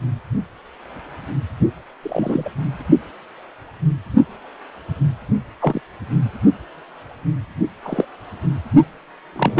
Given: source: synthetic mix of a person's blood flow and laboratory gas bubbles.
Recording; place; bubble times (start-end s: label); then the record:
Doppler ultrasound of blood flow; precordium
2.03-2.50 s: bubbles
5.60-5.81 s: bubbles
7.83-8.05 s: bubbles
9.36-9.60 s: bubbles
From the record:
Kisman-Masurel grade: 123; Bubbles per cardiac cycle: 1 to 2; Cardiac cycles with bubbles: 10 to 50%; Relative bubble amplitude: loud (0.450 to 0.775); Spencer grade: 2 (many but less than half of the cardiac periods contain bubble signals, singularly or in groups); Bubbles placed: only in the low amplitude regions of the cardiac cycle